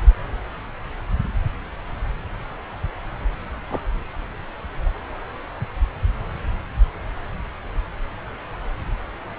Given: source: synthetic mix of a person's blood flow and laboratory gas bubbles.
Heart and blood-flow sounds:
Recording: Doppler ultrasound of blood flow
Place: subclavian vein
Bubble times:
3.67-3.82 s: bubbles
4.85-4.89 s: bubbles
From the record:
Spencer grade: 2 (many but less than half of the cardiac periods contain bubble signals, singularly or in groups)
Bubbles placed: anywhere in the cardiac cycle

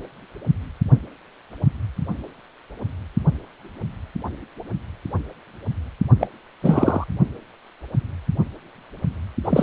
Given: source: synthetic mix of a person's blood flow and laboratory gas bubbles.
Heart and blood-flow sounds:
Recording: Doppler ultrasound of blood flow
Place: precordium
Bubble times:
6.19-6.27 s: bubbles
6.62-7.04 s: bubbles
9.44-9.63 s: bubbles
From the record:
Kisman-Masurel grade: 223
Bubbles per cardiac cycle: several, 3 to 8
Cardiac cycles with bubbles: 10 to 50%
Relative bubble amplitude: loud (0.450 to 0.775)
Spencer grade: 2 (many but less than half of the cardiac periods contain bubble signals, singularly or in groups)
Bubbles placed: only in the low amplitude regions of the cardiac cycle

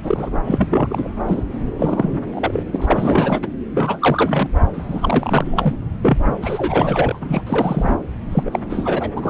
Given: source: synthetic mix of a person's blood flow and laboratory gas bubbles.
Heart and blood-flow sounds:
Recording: Doppler ultrasound of blood flow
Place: subclavian vein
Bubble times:
0.03-0.30 s: bubbles
0.45-1.07 s: bubbles
1.26-1.43 s: bubbles
1.78-2.19 s: bubbles
2.33-2.63 s: bubbles
2.73-3.48 s: bubbles
3.74-4.49 s: bubbles
4.73-5.74 s: bubbles
6.02-6.17 s: bubbles
6.42-7.19 s: bubbles
7.21-7.42 s: bubbles
7.47-7.96 s: bubbles
8.31-8.59 s: bubbles
8.70-9.09 s: bubbles
9.16-9.30 s: bubbles
From the record:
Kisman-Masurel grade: 342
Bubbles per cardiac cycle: rolling drumbeat, 9 or more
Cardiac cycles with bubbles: 100%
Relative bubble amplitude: moderate (0.250 to 0.450)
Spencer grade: 3 (all of the cardiac periods contain showers or single bubble signals, but not dominating or overriding the cardiac motion signals)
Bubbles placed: anywhere in the cardiac cycle

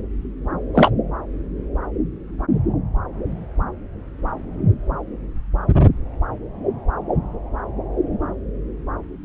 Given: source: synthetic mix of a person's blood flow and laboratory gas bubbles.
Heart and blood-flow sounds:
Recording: Doppler ultrasound of blood flow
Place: subclavian vein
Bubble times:
0.74-0.90 s: bubbles
From the record:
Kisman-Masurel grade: 113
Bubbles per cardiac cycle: 1 to 2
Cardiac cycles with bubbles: 1 to 10%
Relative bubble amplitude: loud (0.450 to 0.775)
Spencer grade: 1 (occasional bubble signal discernible with the cardiac motion signal, with majority of cardiac periods free of bubbles)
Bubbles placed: anywhere in the cardiac cycle

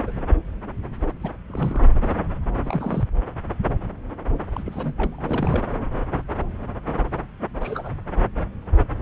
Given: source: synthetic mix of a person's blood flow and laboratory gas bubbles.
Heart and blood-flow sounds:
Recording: Doppler ultrasound of blood flow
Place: subclavian vein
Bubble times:
0.07-0.12 s: bubbles
1.22-1.30 s: bubbles
1.50-1.86 s: bubbles
2.63-3.04 s: bubbles
4.54-4.94 s: bubbles
4.97-5.22 s: bubbles
5.27-5.64 s: bubbles
7.61-7.90 s: bubbles
From the record:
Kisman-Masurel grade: 221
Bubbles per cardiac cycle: several, 3 to 8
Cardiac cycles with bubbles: 10 to 50%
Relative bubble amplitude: barely perceptible (0.100 to 0.250)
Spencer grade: 2 (many but less than half of the cardiac periods contain bubble signals, singularly or in groups)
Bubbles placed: anywhere in the cardiac cycle

